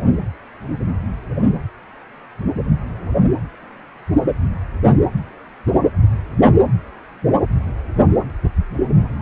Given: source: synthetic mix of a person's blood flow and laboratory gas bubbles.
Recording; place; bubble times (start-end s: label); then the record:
Doppler ultrasound of blood flow; precordium
no bubbles
From the record:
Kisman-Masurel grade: 000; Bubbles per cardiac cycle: 0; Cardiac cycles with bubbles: 0%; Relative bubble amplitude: no bubbles discernible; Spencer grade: 0 (complete lack of bubble signals)